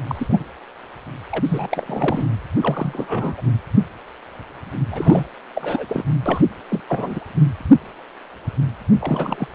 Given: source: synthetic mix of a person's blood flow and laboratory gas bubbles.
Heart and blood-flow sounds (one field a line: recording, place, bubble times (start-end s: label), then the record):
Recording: Doppler ultrasound of blood flow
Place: precordium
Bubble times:
0.08-0.43 s: bubbles
1.31-1.69 s: bubbles
1.71-2.25 s: bubbles
2.61-3.42 s: bubbles
3.46-3.52 s: bubbles
4.90-5.26 s: bubbles
5.55-6.04 s: bubbles
6.25-6.41 s: bubbles
6.68-6.80 s: bubbles
6.88-7.19 s: bubbles
9.01-9.48 s: bubbles
From the record:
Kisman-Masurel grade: 332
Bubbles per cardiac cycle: rolling drumbeat, 9 or more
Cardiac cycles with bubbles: 50 to 99%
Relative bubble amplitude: moderate (0.250 to 0.450)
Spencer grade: 3 (all of the cardiac periods contain showers or single bubble signals, but not dominating or overriding the cardiac motion signals)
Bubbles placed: anywhere in the cardiac cycle